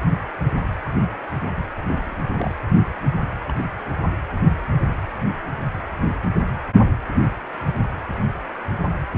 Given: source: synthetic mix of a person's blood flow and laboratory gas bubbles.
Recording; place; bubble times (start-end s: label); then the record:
Doppler ultrasound of blood flow; precordium
1.84-2.21 s: bubbles
2.37-2.54 s: bubbles
3.45-3.54 s: bubbles
3.56-3.65 s: bubbles
From the record:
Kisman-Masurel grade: 121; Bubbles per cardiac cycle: 1 to 2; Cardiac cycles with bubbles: 10 to 50%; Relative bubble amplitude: barely perceptible (0.100 to 0.250); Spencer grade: 2 (many but less than half of the cardiac periods contain bubble signals, singularly or in groups); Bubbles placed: anywhere in the cardiac cycle